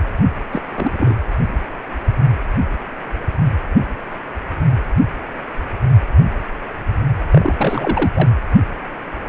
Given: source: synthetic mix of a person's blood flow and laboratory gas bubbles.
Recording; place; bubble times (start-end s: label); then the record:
Doppler ultrasound of blood flow; precordium
0.51-0.62 s: bubbles
0.73-1.16 s: bubbles
7.31-8.11 s: bubbles
8.14-8.29 s: bubbles
From the record:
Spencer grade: 2 (many but less than half of the cardiac periods contain bubble signals, singularly or in groups); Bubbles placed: anywhere in the cardiac cycle